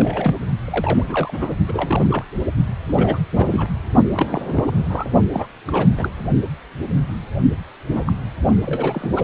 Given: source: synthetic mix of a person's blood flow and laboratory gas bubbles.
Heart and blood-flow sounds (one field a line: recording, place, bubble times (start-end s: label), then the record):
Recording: Doppler ultrasound of blood flow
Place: precordium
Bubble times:
0.00-0.36 s: bubbles
0.65-1.04 s: bubbles
1.07-1.55 s: bubbles
1.68-2.24 s: bubbles
2.88-3.19 s: bubbles
3.35-3.74 s: bubbles
4.13-4.72 s: bubbles
4.88-5.09 s: bubbles
5.32-5.47 s: bubbles
5.67-5.87 s: bubbles
5.97-6.10 s: bubbles
7.92-8.13 s: bubbles
8.48-8.56 s: bubbles
8.65-9.09 s: bubbles
9.16-9.24 s: bubbles
From the record:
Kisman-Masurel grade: 332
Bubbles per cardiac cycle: rolling drumbeat, 9 or more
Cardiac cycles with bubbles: 50 to 99%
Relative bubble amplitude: moderate (0.250 to 0.450)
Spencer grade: 3 (all of the cardiac periods contain showers or single bubble signals, but not dominating or overriding the cardiac motion signals)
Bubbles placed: only in the low amplitude regions of the cardiac cycle